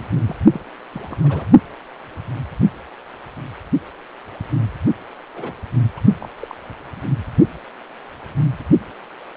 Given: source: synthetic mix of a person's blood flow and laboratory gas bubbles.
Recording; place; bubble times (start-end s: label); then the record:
Doppler ultrasound of blood flow; precordium
0.00-0.20 s: bubbles
0.26-0.36 s: bubbles
0.50-0.61 s: bubbles
0.92-1.16 s: bubbles
1.23-1.45 s: bubbles
5.34-5.53 s: bubbles
5.95-6.00 s: bubbles
6.20-6.29 s: bubbles
6.39-6.55 s: bubbles
From the record:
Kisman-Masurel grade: 221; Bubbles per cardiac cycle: several, 3 to 8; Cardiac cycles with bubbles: 10 to 50%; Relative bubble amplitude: barely perceptible (0.100 to 0.250); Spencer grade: 2 (many but less than half of the cardiac periods contain bubble signals, singularly or in groups); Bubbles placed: only in the low amplitude regions of the cardiac cycle